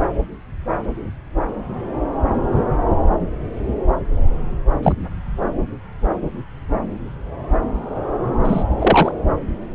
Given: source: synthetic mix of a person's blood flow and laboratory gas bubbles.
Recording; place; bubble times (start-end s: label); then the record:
Doppler ultrasound of blood flow; subclavian vein
4.83-4.93 s: bubbles
8.43-8.64 s: bubbles
8.79-9.12 s: bubbles
From the record:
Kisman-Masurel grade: 123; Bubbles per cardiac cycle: 1 to 2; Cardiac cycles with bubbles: 10 to 50%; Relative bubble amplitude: loud (0.450 to 0.775); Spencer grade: 2 (many but less than half of the cardiac periods contain bubble signals, singularly or in groups); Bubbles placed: anywhere in the cardiac cycle